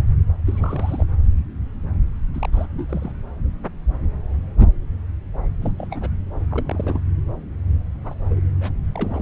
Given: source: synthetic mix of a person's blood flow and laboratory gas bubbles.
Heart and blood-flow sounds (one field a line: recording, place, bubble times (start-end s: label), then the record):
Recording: Doppler ultrasound of blood flow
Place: subclavian vein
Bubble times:
0.46-1.06 s: bubbles
2.33-2.48 s: bubbles
2.52-2.67 s: bubbles
2.77-2.86 s: bubbles
2.89-3.12 s: bubbles
5.62-5.74 s: bubbles
5.78-5.88 s: bubbles
5.90-6.09 s: bubbles
6.51-6.99 s: bubbles
8.03-8.14 s: bubbles
8.29-8.41 s: bubbles
8.61-8.87 s: bubbles
8.95-9.22 s: bubbles
From the record:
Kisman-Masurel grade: 221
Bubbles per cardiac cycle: several, 3 to 8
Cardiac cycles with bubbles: 10 to 50%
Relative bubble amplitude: barely perceptible (0.100 to 0.250)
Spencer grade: 2 (many but less than half of the cardiac periods contain bubble signals, singularly or in groups)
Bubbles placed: anywhere in the cardiac cycle